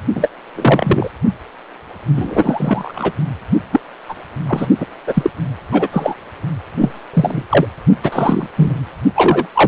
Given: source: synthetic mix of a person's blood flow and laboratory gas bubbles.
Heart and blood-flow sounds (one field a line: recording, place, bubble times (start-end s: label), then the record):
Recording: Doppler ultrasound of blood flow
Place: precordium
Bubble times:
0.15-0.29 s: bubbles
0.55-1.10 s: bubbles
2.15-3.12 s: bubbles
3.73-3.80 s: bubbles
4.08-4.15 s: bubbles
4.47-4.67 s: bubbles
4.79-4.85 s: bubbles
5.06-5.30 s: bubbles
5.71-5.88 s: bubbles
5.92-6.14 s: bubbles
6.80-6.93 s: bubbles
7.13-7.42 s: bubbles
7.50-7.67 s: bubbles
8.03-8.47 s: bubbles
8.56-8.75 s: bubbles
9.15-9.47 s: bubbles
9.54-9.68 s: bubbles
From the record:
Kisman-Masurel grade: 243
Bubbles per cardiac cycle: several, 3 to 8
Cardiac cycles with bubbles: 100%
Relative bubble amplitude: loud (0.450 to 0.775)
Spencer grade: 3 (all of the cardiac periods contain showers or single bubble signals, but not dominating or overriding the cardiac motion signals)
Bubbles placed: only in the low amplitude regions of the cardiac cycle